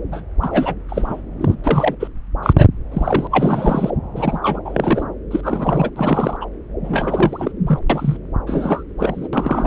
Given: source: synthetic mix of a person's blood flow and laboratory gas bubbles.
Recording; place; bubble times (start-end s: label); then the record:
Doppler ultrasound of blood flow; subclavian vein
0.12-0.22 s: bubbles
0.41-0.74 s: bubbles
0.89-1.21 s: bubbles
1.40-1.54 s: bubbles
1.64-1.95 s: bubbles
1.99-2.08 s: bubbles
2.43-2.53 s: bubbles
2.56-2.67 s: bubbles
2.91-3.27 s: bubbles
3.31-3.90 s: bubbles
4.15-4.60 s: bubbles
4.65-5.04 s: bubbles
5.30-5.90 s: bubbles
5.96-6.36 s: bubbles
6.40-6.46 s: bubbles
6.83-7.52 s: bubbles
7.67-7.79 s: bubbles
7.90-8.17 s: bubbles
8.46-8.83 s: bubbles
8.98-9.29 s: bubbles
9.33-9.66 s: bubbles
From the record:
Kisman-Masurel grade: 243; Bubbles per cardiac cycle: several, 3 to 8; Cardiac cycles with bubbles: 100%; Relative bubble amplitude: loud (0.450 to 0.775); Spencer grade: 3 (all of the cardiac periods contain showers or single bubble signals, but not dominating or overriding the cardiac motion signals); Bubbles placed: anywhere in the cardiac cycle